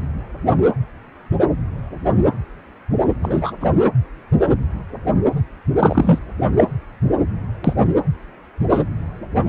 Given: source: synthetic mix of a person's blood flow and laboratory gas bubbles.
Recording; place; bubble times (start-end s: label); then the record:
Doppler ultrasound of blood flow; precordium
3.22-3.53 s: bubbles
3.60-3.71 s: bubbles
5.79-6.18 s: bubbles
6.56-6.64 s: bubbles
7.64-7.75 s: bubbles
8.70-8.83 s: bubbles
From the record:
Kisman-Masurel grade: 123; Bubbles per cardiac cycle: 1 to 2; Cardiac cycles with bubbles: 10 to 50%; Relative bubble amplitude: loud (0.450 to 0.775); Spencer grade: 2 (many but less than half of the cardiac periods contain bubble signals, singularly or in groups); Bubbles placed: anywhere in the cardiac cycle